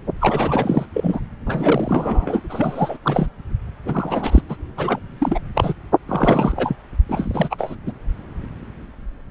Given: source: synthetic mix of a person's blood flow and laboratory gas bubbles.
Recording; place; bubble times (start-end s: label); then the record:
Doppler ultrasound of blood flow; subclavian vein
0.20-0.85 s: bubbles
0.94-1.20 s: bubbles
1.46-2.40 s: bubbles
2.49-2.97 s: bubbles
3.02-3.27 s: bubbles
3.85-4.42 s: bubbles
4.49-4.56 s: bubbles
4.77-4.99 s: bubbles
5.20-5.40 s: bubbles
5.54-5.74 s: bubbles
6.07-6.77 s: bubbles
7.08-7.75 s: bubbles
7.86-7.92 s: bubbles
From the record:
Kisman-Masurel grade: 332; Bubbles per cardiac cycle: rolling drumbeat, 9 or more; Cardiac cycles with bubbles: 50 to 99%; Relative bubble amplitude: moderate (0.250 to 0.450); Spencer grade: 3 (all of the cardiac periods contain showers or single bubble signals, but not dominating or overriding the cardiac motion signals); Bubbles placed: anywhere in the cardiac cycle